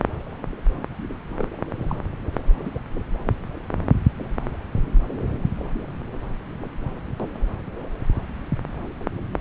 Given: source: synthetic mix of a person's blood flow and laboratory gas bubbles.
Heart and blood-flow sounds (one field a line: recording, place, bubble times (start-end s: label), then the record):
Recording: Doppler ultrasound of blood flow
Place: subclavian vein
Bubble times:
1.39-1.47 s: bubbles
1.89-1.95 s: bubbles
2.74-2.78 s: bubbles
From the record:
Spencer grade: 1 (occasional bubble signal discernible with the cardiac motion signal, with majority of cardiac periods free of bubbles)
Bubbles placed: anywhere in the cardiac cycle